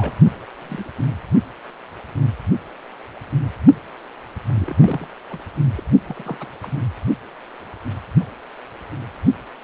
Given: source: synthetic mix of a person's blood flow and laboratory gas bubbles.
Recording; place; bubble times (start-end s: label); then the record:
Doppler ultrasound of blood flow; precordium
0.00-0.12 s: bubbles
0.61-0.90 s: bubbles
0.96-1.06 s: bubbles
4.49-4.53 s: bubbles
4.57-5.07 s: bubbles
5.30-5.39 s: bubbles
5.77-5.83 s: bubbles
6.07-6.47 s: bubbles
6.63-6.81 s: bubbles
From the record:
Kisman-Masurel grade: 221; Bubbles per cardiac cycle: several, 3 to 8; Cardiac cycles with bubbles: 10 to 50%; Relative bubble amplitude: barely perceptible (0.100 to 0.250); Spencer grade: 2 (many but less than half of the cardiac periods contain bubble signals, singularly or in groups); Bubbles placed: only in the low amplitude regions of the cardiac cycle